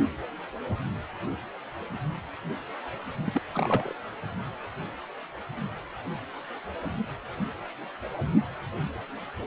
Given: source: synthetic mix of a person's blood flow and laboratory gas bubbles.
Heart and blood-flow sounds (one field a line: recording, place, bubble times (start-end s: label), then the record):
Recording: Doppler ultrasound of blood flow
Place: precordium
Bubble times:
3.25-3.42 s: bubbles
3.50-3.94 s: bubbles
From the record:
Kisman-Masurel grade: 211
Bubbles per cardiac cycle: several, 3 to 8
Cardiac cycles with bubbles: 1 to 10%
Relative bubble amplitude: barely perceptible (0.100 to 0.250)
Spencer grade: 1 (occasional bubble signal discernible with the cardiac motion signal, with majority of cardiac periods free of bubbles)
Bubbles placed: anywhere in the cardiac cycle